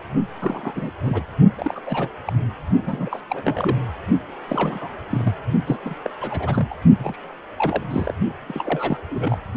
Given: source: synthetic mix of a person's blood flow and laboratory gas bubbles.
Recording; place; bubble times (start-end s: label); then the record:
Doppler ultrasound of blood flow; precordium
0.40-0.91 s: bubbles
1.02-1.23 s: bubbles
1.57-1.81 s: bubbles
1.85-2.09 s: bubbles
2.25-2.33 s: bubbles
2.81-3.21 s: bubbles
3.29-3.76 s: bubbles
4.48-4.89 s: bubbles
5.10-5.33 s: bubbles
5.66-5.78 s: bubbles
5.85-6.00 s: bubbles
6.02-6.10 s: bubbles
6.21-6.74 s: bubbles
6.98-7.18 s: bubbles
7.56-7.83 s: bubbles
7.90-8.13 s: bubbles
8.47-8.98 s: bubbles
9.10-9.41 s: bubbles
From the record:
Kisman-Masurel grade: 342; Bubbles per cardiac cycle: rolling drumbeat, 9 or more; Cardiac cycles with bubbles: 100%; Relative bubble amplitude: moderate (0.250 to 0.450); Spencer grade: 3 (all of the cardiac periods contain showers or single bubble signals, but not dominating or overriding the cardiac motion signals); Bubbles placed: only in the low amplitude regions of the cardiac cycle